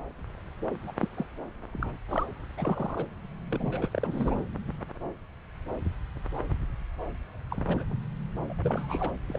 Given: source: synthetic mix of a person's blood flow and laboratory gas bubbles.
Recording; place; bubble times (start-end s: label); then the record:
Doppler ultrasound of blood flow; subclavian vein
0.87-0.92 s: bubbles
1.01-1.07 s: bubbles
1.17-1.25 s: bubbles
1.73-1.97 s: bubbles
2.08-2.25 s: bubbles
2.57-3.06 s: bubbles
3.51-4.36 s: bubbles
7.51-7.65 s: bubbles
7.68-7.85 s: bubbles
8.49-8.54 s: bubbles
8.64-9.11 s: bubbles
9.29-9.39 s: bubbles
From the record:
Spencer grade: 2 (many but less than half of the cardiac periods contain bubble signals, singularly or in groups); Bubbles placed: anywhere in the cardiac cycle